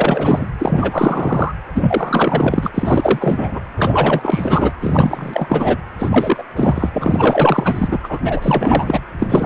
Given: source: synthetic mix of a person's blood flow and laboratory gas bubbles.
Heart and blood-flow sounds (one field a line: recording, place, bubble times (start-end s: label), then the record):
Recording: Doppler ultrasound of blood flow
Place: precordium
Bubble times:
0.00-0.49 s: bubbles
0.59-1.53 s: bubbles
1.75-2.71 s: bubbles
2.74-3.60 s: bubbles
3.77-4.72 s: bubbles
4.80-5.78 s: bubbles
5.99-6.44 s: bubbles
6.55-6.90 s: bubbles
6.93-7.97 s: bubbles
8.03-9.00 s: bubbles
9.19-9.46 s: bubbles
From the record:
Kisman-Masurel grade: 444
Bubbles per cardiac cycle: continuous sound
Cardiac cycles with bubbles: 100%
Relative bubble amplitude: maximal (0.775 to 0.999)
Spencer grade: 4 (maximum detectable bubble signal sounding continuously throughout systole and diastole of every cardiac period, and overriding the amplitude of the normal cardiac signals)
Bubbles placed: anywhere in the cardiac cycle